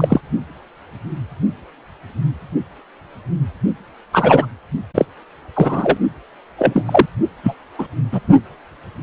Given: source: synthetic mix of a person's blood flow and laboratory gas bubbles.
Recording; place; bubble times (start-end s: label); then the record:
Doppler ultrasound of blood flow; precordium
0.00-0.21 s: bubbles
4.12-4.46 s: bubbles
4.94-5.05 s: bubbles
5.55-5.98 s: bubbles
6.58-7.06 s: bubbles
7.43-7.54 s: bubbles
7.79-7.88 s: bubbles
8.12-8.21 s: bubbles
From the record:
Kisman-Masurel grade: 223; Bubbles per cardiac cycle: several, 3 to 8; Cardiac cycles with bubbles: 10 to 50%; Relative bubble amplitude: loud (0.450 to 0.775); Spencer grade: 2 (many but less than half of the cardiac periods contain bubble signals, singularly or in groups); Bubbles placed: only in the low amplitude regions of the cardiac cycle